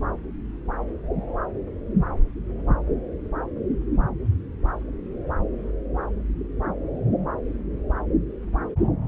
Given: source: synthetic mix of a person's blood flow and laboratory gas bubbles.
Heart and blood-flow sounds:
Doppler ultrasound of blood flow; subclavian vein
no bubbles
From the record:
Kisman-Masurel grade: 000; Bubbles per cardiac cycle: 0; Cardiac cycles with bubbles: 0%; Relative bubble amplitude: no bubbles discernible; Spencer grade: 0 (complete lack of bubble signals)

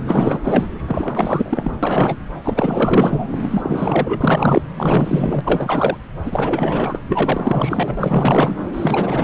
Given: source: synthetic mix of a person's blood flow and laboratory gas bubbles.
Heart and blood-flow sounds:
Doppler ultrasound of blood flow; subclavian vein
0.07-0.40 s: bubbles
0.43-0.66 s: bubbles
0.87-1.71 s: bubbles
1.82-2.16 s: bubbles
2.44-3.28 s: bubbles
3.42-4.62 s: bubbles
4.77-5.41 s: bubbles
5.44-5.98 s: bubbles
6.25-6.99 s: bubbles
7.10-8.57 s: bubbles
8.73-9.24 s: bubbles
From the record:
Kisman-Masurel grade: 444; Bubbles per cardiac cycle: continuous sound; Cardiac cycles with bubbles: 100%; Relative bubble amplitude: maximal (0.775 to 0.999); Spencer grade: 4 (maximum detectable bubble signal sounding continuously throughout systole and diastole of every cardiac period, and overriding the amplitude of the normal cardiac signals); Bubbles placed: anywhere in the cardiac cycle

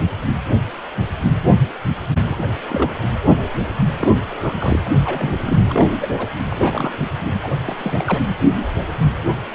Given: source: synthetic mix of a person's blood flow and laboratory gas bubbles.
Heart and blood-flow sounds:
Doppler ultrasound of blood flow; precordium
2.25-2.52 s: bubbles
2.67-2.96 s: bubbles
3.98-4.12 s: bubbles
4.42-4.54 s: bubbles
4.59-4.79 s: bubbles
4.85-4.91 s: bubbles
5.04-5.88 s: bubbles
6.01-6.08 s: bubbles
6.18-6.28 s: bubbles
6.49-6.94 s: bubbles
7.43-7.48 s: bubbles
7.66-7.76 s: bubbles
7.78-8.21 s: bubbles
From the record:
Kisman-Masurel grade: 222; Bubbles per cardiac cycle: several, 3 to 8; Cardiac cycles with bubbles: 10 to 50%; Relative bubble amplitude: moderate (0.250 to 0.450); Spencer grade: 2 (many but less than half of the cardiac periods contain bubble signals, singularly or in groups); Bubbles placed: anywhere in the cardiac cycle

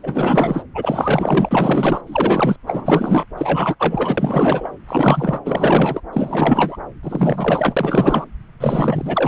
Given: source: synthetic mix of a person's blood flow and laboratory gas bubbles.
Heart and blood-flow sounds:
Doppler ultrasound of blood flow; subclavian vein
0.03-0.62 s: bubbles
0.74-2.01 s: bubbles
2.06-2.56 s: bubbles
2.66-3.25 s: bubbles
3.37-3.75 s: bubbles
3.79-4.70 s: bubbles
4.87-5.40 s: bubbles
5.45-6.00 s: bubbles
6.12-6.77 s: bubbles
7.03-8.24 s: bubbles
8.59-9.28 s: bubbles
From the record:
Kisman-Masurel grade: 444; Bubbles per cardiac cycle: continuous sound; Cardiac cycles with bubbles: 100%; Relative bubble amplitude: maximal (0.775 to 0.999); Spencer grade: 4 (maximum detectable bubble signal sounding continuously throughout systole and diastole of every cardiac period, and overriding the amplitude of the normal cardiac signals); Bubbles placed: anywhere in the cardiac cycle

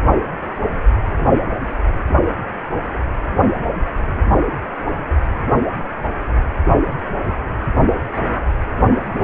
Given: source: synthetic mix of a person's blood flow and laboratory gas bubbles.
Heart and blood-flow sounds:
Doppler ultrasound of blood flow; precordium
no bubbles
From the record:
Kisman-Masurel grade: 000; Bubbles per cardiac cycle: 0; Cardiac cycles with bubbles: 0%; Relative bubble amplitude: no bubbles discernible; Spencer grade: 0 (complete lack of bubble signals)

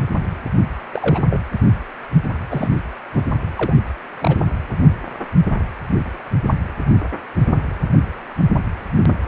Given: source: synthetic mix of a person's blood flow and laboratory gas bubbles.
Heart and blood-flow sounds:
Doppler ultrasound of blood flow; precordium
0.93-1.22 s: bubbles
1.29-1.42 s: bubbles
2.50-2.70 s: bubbles
3.14-3.26 s: bubbles
3.56-3.75 s: bubbles
4.14-4.46 s: bubbles
From the record:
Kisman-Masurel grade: 222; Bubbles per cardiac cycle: several, 3 to 8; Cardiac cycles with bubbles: 10 to 50%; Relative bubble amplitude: moderate (0.250 to 0.450); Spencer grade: 2 (many but less than half of the cardiac periods contain bubble signals, singularly or in groups); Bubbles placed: anywhere in the cardiac cycle

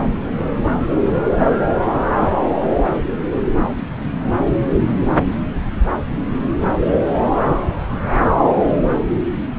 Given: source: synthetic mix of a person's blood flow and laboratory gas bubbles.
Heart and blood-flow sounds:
Doppler ultrasound of blood flow; subclavian vein
no bubbles
From the record:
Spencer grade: 0 (complete lack of bubble signals)

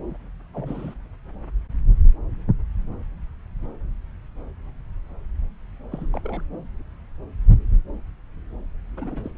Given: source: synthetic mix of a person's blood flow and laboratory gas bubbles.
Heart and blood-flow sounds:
Doppler ultrasound of blood flow; subclavian vein
0.08-0.17 s: bubbles
0.54-0.94 s: bubbles
5.91-6.08 s: bubbles
6.13-6.21 s: bubbles
6.25-6.43 s: bubbles
8.97-9.30 s: bubbles
From the record:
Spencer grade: 2 (many but less than half of the cardiac periods contain bubble signals, singularly or in groups); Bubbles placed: anywhere in the cardiac cycle

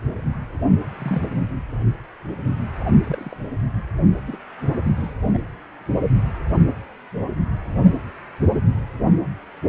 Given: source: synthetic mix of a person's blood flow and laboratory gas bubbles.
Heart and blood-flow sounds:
Doppler ultrasound of blood flow; precordium
0.98-1.23 s: bubbles
2.99-3.36 s: bubbles
4.27-4.38 s: bubbles
4.96-5.14 s: bubbles
5.33-5.38 s: bubbles
From the record:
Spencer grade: 2 (many but less than half of the cardiac periods contain bubble signals, singularly or in groups); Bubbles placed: anywhere in the cardiac cycle

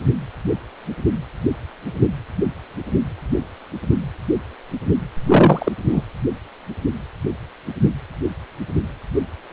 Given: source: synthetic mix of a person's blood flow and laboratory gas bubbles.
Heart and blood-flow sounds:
Doppler ultrasound of blood flow; precordium
5.27-5.72 s: bubbles
5.91-6.02 s: bubbles
From the record:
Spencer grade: 1 (occasional bubble signal discernible with the cardiac motion signal, with majority of cardiac periods free of bubbles); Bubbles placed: anywhere in the cardiac cycle

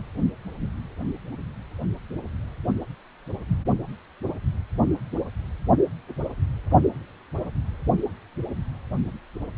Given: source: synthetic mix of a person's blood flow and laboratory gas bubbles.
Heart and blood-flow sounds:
Doppler ultrasound of blood flow; precordium
no bubbles
From the record:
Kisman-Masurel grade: 000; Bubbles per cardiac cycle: 0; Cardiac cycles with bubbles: 0%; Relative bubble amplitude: no bubbles discernible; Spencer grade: 0 (complete lack of bubble signals)

